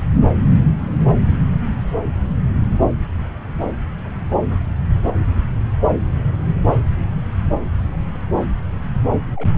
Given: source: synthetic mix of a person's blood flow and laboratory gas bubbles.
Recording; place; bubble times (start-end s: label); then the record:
Doppler ultrasound of blood flow; subclavian vein
9.36-9.58 s: bubbles
From the record:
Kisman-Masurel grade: 111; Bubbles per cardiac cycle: 1 to 2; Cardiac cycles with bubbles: 1 to 10%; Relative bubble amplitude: barely perceptible (0.100 to 0.250); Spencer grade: 1 (occasional bubble signal discernible with the cardiac motion signal, with majority of cardiac periods free of bubbles); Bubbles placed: anywhere in the cardiac cycle